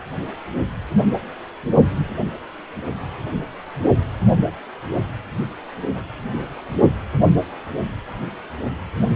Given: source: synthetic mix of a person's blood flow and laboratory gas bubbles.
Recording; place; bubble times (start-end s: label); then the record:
Doppler ultrasound of blood flow; precordium
5.94-6.04 s: bubbles
6.30-6.43 s: bubbles
6.55-6.61 s: bubbles
From the record:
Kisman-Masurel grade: 211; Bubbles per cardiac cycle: several, 3 to 8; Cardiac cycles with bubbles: 1 to 10%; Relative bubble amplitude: barely perceptible (0.100 to 0.250); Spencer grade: 1 (occasional bubble signal discernible with the cardiac motion signal, with majority of cardiac periods free of bubbles); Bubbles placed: only in the low amplitude regions of the cardiac cycle